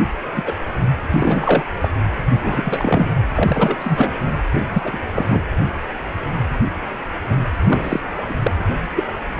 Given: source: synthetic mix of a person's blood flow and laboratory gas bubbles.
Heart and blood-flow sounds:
Doppler ultrasound of blood flow; precordium
0.35-0.55 s: bubbles
1.10-1.65 s: bubbles
1.81-1.89 s: bubbles
2.43-3.12 s: bubbles
3.35-3.76 s: bubbles
3.79-4.15 s: bubbles
4.53-4.61 s: bubbles
4.74-4.99 s: bubbles
5.15-5.50 s: bubbles
7.29-7.35 s: bubbles
7.53-8.00 s: bubbles
8.29-8.34 s: bubbles
8.43-8.52 s: bubbles
8.96-9.03 s: bubbles
From the record:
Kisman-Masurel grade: 233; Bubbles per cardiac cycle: several, 3 to 8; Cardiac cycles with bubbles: 50 to 99%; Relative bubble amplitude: loud (0.450 to 0.775); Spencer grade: 3 (all of the cardiac periods contain showers or single bubble signals, but not dominating or overriding the cardiac motion signals); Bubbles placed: anywhere in the cardiac cycle

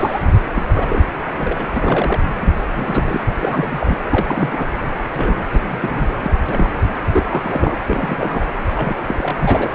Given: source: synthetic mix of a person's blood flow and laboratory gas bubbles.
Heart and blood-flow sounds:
Doppler ultrasound of blood flow; precordium
0.00-0.23 s: bubbles
0.54-0.63 s: bubbles
0.73-1.05 s: bubbles
1.39-1.66 s: bubbles
1.76-2.21 s: bubbles
2.41-2.54 s: bubbles
2.72-3.21 s: bubbles
3.35-4.03 s: bubbles
4.12-4.67 s: bubbles
5.16-5.43 s: bubbles
5.52-5.60 s: bubbles
5.68-6.30 s: bubbles
6.48-6.69 s: bubbles
7.12-7.77 s: bubbles
7.86-8.44 s: bubbles
8.74-8.96 s: bubbles
9.07-9.74 s: bubbles
From the record:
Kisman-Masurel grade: 342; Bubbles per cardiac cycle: rolling drumbeat, 9 or more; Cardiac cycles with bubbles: 100%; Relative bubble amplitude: moderate (0.250 to 0.450); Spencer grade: 3 (all of the cardiac periods contain showers or single bubble signals, but not dominating or overriding the cardiac motion signals); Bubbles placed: anywhere in the cardiac cycle

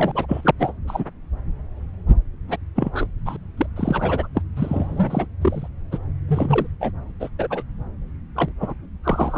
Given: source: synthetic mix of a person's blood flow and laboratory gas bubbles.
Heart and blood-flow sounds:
Doppler ultrasound of blood flow; subclavian vein
0.00-0.41 s: bubbles
0.44-0.51 s: bubbles
0.59-0.73 s: bubbles
0.88-1.04 s: bubbles
2.48-2.56 s: bubbles
2.76-3.07 s: bubbles
3.25-3.37 s: bubbles
3.57-3.67 s: bubbles
3.76-4.28 s: bubbles
4.34-4.42 s: bubbles
4.56-5.26 s: bubbles
5.41-5.68 s: bubbles
5.91-5.98 s: bubbles
6.28-6.67 s: bubbles
6.80-6.92 s: bubbles
7.20-7.29 s: bubbles
7.38-7.47 s: bubbles
7.50-7.62 s: bubbles
8.36-8.52 s: bubbles
8.60-8.73 s: bubbles
9.04-9.38 s: bubbles
From the record:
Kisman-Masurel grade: 242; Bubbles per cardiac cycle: several, 3 to 8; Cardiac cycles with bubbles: 100%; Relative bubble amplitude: moderate (0.250 to 0.450); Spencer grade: 3 (all of the cardiac periods contain showers or single bubble signals, but not dominating or overriding the cardiac motion signals); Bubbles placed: anywhere in the cardiac cycle

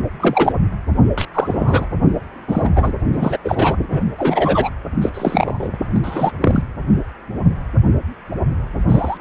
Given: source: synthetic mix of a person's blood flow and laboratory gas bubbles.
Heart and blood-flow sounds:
Doppler ultrasound of blood flow; precordium
0.20-0.52 s: bubbles
1.18-1.25 s: bubbles
1.34-1.86 s: bubbles
2.48-2.70 s: bubbles
2.75-2.92 s: bubbles
3.13-3.37 s: bubbles
3.44-3.76 s: bubbles
3.91-4.04 s: bubbles
4.18-4.70 s: bubbles
5.02-5.10 s: bubbles
5.14-5.70 s: bubbles
5.94-5.99 s: bubbles
6.03-6.32 s: bubbles
6.41-6.63 s: bubbles
8.88-9.17 s: bubbles
From the record:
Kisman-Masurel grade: 233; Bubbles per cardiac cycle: several, 3 to 8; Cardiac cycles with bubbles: 50 to 99%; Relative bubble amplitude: loud (0.450 to 0.775); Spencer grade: 3 (all of the cardiac periods contain showers or single bubble signals, but not dominating or overriding the cardiac motion signals); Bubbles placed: anywhere in the cardiac cycle

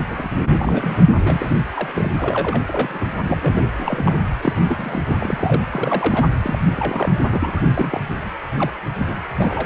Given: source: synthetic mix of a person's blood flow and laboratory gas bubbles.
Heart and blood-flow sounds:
Doppler ultrasound of blood flow; precordium
0.00-0.07 s: bubbles
0.09-0.37 s: bubbles
0.45-0.51 s: bubbles
0.58-0.97 s: bubbles
1.16-1.60 s: bubbles
1.74-2.11 s: bubbles
2.19-2.62 s: bubbles
2.67-3.05 s: bubbles
3.24-3.63 s: bubbles
3.73-4.18 s: bubbles
4.42-5.13 s: bubbles
5.20-5.64 s: bubbles
5.71-6.28 s: bubbles
6.43-6.58 s: bubbles
6.77-7.12 s: bubbles
7.28-7.61 s: bubbles
7.74-8.01 s: bubbles
8.59-8.72 s: bubbles
8.98-9.20 s: bubbles
9.38-9.66 s: bubbles
From the record:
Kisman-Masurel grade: 242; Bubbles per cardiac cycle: several, 3 to 8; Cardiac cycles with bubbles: 100%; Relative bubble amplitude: moderate (0.250 to 0.450); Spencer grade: 3 (all of the cardiac periods contain showers or single bubble signals, but not dominating or overriding the cardiac motion signals); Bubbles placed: anywhere in the cardiac cycle

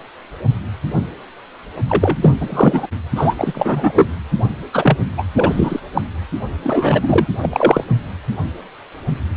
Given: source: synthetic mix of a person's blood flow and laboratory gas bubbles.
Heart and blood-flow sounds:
Doppler ultrasound of blood flow; precordium
1.89-2.18 s: bubbles
2.21-2.35 s: bubbles
2.40-2.88 s: bubbles
3.16-3.35 s: bubbles
3.38-3.93 s: bubbles
3.96-4.08 s: bubbles
4.73-4.97 s: bubbles
5.17-5.24 s: bubbles
5.35-5.80 s: bubbles
5.94-6.01 s: bubbles
6.63-7.26 s: bubbles
7.42-7.84 s: bubbles
From the record:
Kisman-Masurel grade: 333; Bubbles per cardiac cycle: rolling drumbeat, 9 or more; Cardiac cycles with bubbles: 50 to 99%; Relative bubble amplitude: loud (0.450 to 0.775); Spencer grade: 3 (all of the cardiac periods contain showers or single bubble signals, but not dominating or overriding the cardiac motion signals); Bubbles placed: only in the low amplitude regions of the cardiac cycle

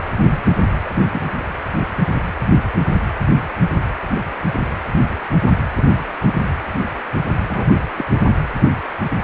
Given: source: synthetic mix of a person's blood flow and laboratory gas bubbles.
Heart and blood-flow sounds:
Doppler ultrasound of blood flow; precordium
0.28-0.42 s: bubbles
0.85-0.90 s: bubbles
1.12-1.21 s: bubbles
5.76-5.83 s: bubbles
6.26-6.32 s: bubbles
7.36-7.79 s: bubbles
7.97-8.04 s: bubbles
From the record:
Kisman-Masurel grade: 122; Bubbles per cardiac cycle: 1 to 2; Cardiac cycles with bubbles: 10 to 50%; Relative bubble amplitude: moderate (0.250 to 0.450); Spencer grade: 2 (many but less than half of the cardiac periods contain bubble signals, singularly or in groups); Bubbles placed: anywhere in the cardiac cycle

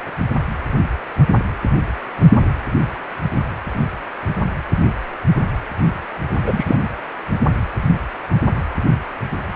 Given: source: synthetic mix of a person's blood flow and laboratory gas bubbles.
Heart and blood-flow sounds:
Doppler ultrasound of blood flow; precordium
6.46-6.79 s: bubbles
From the record:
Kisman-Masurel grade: 213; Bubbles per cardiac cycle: several, 3 to 8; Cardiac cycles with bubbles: 1 to 10%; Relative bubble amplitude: loud (0.450 to 0.775); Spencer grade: 1 (occasional bubble signal discernible with the cardiac motion signal, with majority of cardiac periods free of bubbles); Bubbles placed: anywhere in the cardiac cycle

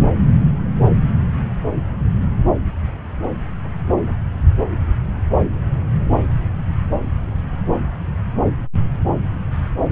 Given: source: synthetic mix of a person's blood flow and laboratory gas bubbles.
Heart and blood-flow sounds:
Doppler ultrasound of blood flow; subclavian vein
no bubbles
From the record:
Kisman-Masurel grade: 000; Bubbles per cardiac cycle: 0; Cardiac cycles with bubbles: 0%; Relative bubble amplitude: no bubbles discernible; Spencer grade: 0 (complete lack of bubble signals)

